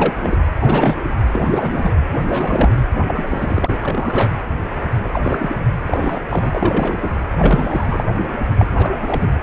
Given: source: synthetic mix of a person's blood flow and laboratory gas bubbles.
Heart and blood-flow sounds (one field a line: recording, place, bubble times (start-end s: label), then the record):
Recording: Doppler ultrasound of blood flow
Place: precordium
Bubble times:
0.00-0.38 s: bubbles
0.60-0.95 s: bubbles
1.29-1.94 s: bubbles
2.12-2.24 s: bubbles
2.27-2.77 s: bubbles
3.08-3.78 s: bubbles
3.82-4.29 s: bubbles
5.03-5.20 s: bubbles
5.22-5.57 s: bubbles
5.86-6.21 s: bubbles
6.28-7.09 s: bubbles
7.31-8.04 s: bubbles
8.58-8.67 s: bubbles
8.74-8.94 s: bubbles
9.02-9.33 s: bubbles
From the record:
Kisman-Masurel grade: 342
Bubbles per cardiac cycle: rolling drumbeat, 9 or more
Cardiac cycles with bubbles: 100%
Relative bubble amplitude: moderate (0.250 to 0.450)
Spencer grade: 3 (all of the cardiac periods contain showers or single bubble signals, but not dominating or overriding the cardiac motion signals)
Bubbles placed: anywhere in the cardiac cycle